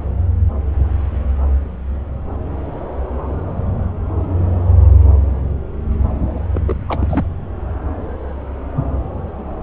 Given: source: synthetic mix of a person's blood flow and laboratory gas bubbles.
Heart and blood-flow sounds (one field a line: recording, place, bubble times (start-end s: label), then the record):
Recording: Doppler ultrasound of blood flow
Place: subclavian vein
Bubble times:
6.54-6.61 s: bubbles
6.66-6.83 s: bubbles
6.88-7.25 s: bubbles
From the record:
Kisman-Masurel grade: 211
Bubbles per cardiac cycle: several, 3 to 8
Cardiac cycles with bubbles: 1 to 10%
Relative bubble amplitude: barely perceptible (0.100 to 0.250)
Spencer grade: 1 (occasional bubble signal discernible with the cardiac motion signal, with majority of cardiac periods free of bubbles)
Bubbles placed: anywhere in the cardiac cycle